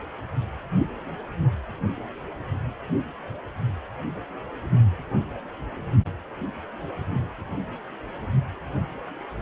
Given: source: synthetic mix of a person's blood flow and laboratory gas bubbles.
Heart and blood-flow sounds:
Doppler ultrasound of blood flow; precordium
no bubbles
From the record:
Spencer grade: 0 (complete lack of bubble signals)

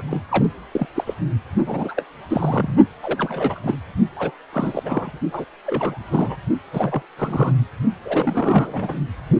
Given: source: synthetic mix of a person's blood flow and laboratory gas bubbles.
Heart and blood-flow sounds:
Doppler ultrasound of blood flow; precordium
0.00-0.02 s: bubbles
0.08-0.19 s: bubbles
0.29-0.45 s: bubbles
0.71-0.87 s: bubbles
0.95-1.14 s: bubbles
1.66-2.03 s: bubbles
2.29-2.76 s: bubbles
3.02-3.59 s: bubbles
3.63-3.77 s: bubbles
4.16-4.31 s: bubbles
4.52-5.18 s: bubbles
5.31-5.45 s: bubbles
5.66-5.98 s: bubbles
6.10-6.36 s: bubbles
6.72-7.02 s: bubbles
7.17-7.54 s: bubbles
8.04-9.00 s: bubbles
From the record:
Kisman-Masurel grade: 342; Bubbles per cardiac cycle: rolling drumbeat, 9 or more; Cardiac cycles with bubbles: 100%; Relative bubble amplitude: moderate (0.250 to 0.450); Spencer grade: 3 (all of the cardiac periods contain showers or single bubble signals, but not dominating or overriding the cardiac motion signals); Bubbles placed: only in the low amplitude regions of the cardiac cycle

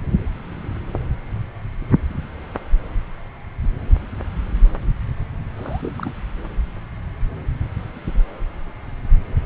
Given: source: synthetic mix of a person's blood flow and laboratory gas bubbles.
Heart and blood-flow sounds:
Doppler ultrasound of blood flow; subclavian vein
5.57-6.12 s: bubbles
From the record:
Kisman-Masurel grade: 211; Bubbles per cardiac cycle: several, 3 to 8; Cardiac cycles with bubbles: 1 to 10%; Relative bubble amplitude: barely perceptible (0.100 to 0.250); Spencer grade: 1 (occasional bubble signal discernible with the cardiac motion signal, with majority of cardiac periods free of bubbles); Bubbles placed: anywhere in the cardiac cycle

